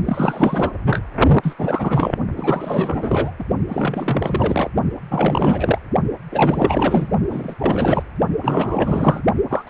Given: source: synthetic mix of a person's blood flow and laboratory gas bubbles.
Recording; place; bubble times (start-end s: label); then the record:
Doppler ultrasound of blood flow; precordium
0.05-0.74 s: bubbles
0.84-1.01 s: bubbles
1.43-1.56 s: bubbles
1.58-2.15 s: bubbles
2.36-3.32 s: bubbles
3.39-3.44 s: bubbles
3.69-4.69 s: bubbles
5.11-5.79 s: bubbles
6.32-7.08 s: bubbles
7.31-7.55 s: bubbles
7.59-8.03 s: bubbles
8.43-9.21 s: bubbles
9.50-9.70 s: bubbles
From the record:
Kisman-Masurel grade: 444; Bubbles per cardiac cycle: continuous sound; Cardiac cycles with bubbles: 100%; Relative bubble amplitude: maximal (0.775 to 0.999); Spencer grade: 4 (maximum detectable bubble signal sounding continuously throughout systole and diastole of every cardiac period, and overriding the amplitude of the normal cardiac signals); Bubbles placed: only in the low amplitude regions of the cardiac cycle